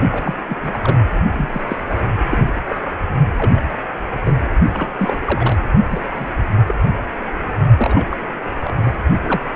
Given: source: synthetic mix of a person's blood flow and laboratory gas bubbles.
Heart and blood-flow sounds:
Doppler ultrasound of blood flow; precordium
0.11-0.34 s: bubbles
0.46-0.57 s: bubbles
0.62-0.80 s: bubbles
0.83-0.98 s: bubbles
1.33-1.49 s: bubbles
1.53-1.61 s: bubbles
1.68-1.77 s: bubbles
2.29-2.52 s: bubbles
2.66-2.81 s: bubbles
3.36-3.64 s: bubbles
4.25-4.40 s: bubbles
4.74-4.88 s: bubbles
4.97-5.16 s: bubbles
5.25-5.58 s: bubbles
5.90-6.05 s: bubbles
6.16-6.26 s: bubbles
6.67-6.75 s: bubbles
7.76-8.16 s: bubbles
8.63-8.74 s: bubbles
8.83-8.95 s: bubbles
9.23-9.41 s: bubbles
From the record:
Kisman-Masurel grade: 242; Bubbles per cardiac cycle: several, 3 to 8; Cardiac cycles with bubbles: 100%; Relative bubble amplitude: moderate (0.250 to 0.450); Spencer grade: 3 (all of the cardiac periods contain showers or single bubble signals, but not dominating or overriding the cardiac motion signals); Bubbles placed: only in the low amplitude regions of the cardiac cycle

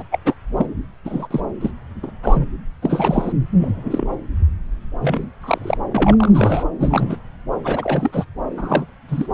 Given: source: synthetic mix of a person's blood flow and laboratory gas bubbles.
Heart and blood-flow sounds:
Doppler ultrasound of blood flow; subclavian vein
0.00-0.03 s: bubbles
0.11-0.19 s: bubbles
0.25-0.34 s: bubbles
0.56-0.67 s: bubbles
1.05-1.28 s: bubbles
1.31-1.41 s: bubbles
1.60-1.71 s: bubbles
2.02-2.11 s: bubbles
2.23-2.50 s: bubbles
2.82-3.33 s: bubbles
3.59-4.07 s: bubbles
5.00-5.29 s: bubbles
5.40-5.77 s: bubbles
5.89-6.63 s: bubbles
6.80-7.17 s: bubbles
7.64-8.25 s: bubbles
8.57-8.95 s: bubbles
9.08-9.27 s: bubbles
From the record:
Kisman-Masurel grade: 233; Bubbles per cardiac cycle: several, 3 to 8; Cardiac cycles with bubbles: 50 to 99%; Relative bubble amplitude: loud (0.450 to 0.775); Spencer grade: 3 (all of the cardiac periods contain showers or single bubble signals, but not dominating or overriding the cardiac motion signals); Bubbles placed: anywhere in the cardiac cycle

